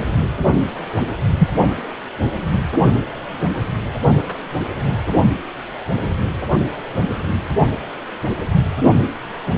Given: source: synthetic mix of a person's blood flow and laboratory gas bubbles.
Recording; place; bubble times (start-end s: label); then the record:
Doppler ultrasound of blood flow; precordium
1.38-1.48 s: bubbles
From the record:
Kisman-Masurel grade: 123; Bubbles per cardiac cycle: 1 to 2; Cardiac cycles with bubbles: 10 to 50%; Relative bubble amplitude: loud (0.450 to 0.775); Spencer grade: 2 (many but less than half of the cardiac periods contain bubble signals, singularly or in groups); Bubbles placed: only in the low amplitude regions of the cardiac cycle